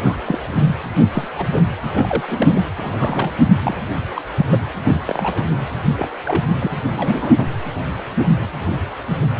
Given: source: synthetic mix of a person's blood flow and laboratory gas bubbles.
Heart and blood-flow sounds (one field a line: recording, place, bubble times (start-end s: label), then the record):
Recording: Doppler ultrasound of blood flow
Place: precordium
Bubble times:
0.03-0.17 s: bubbles
0.26-0.40 s: bubbles
0.50-0.78 s: bubbles
1.13-1.28 s: bubbles
1.36-1.63 s: bubbles
1.91-2.62 s: bubbles
2.76-3.33 s: bubbles
3.54-3.59 s: bubbles
3.63-3.77 s: bubbles
4.15-4.21 s: bubbles
4.36-4.45 s: bubbles
4.51-4.67 s: bubbles
4.83-4.96 s: bubbles
5.05-5.44 s: bubbles
5.97-6.08 s: bubbles
6.25-6.43 s: bubbles
6.59-6.71 s: bubbles
6.89-7.34 s: bubbles
7.37-7.44 s: bubbles
From the record:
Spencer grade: 3 (all of the cardiac periods contain showers or single bubble signals, but not dominating or overriding the cardiac motion signals)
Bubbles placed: anywhere in the cardiac cycle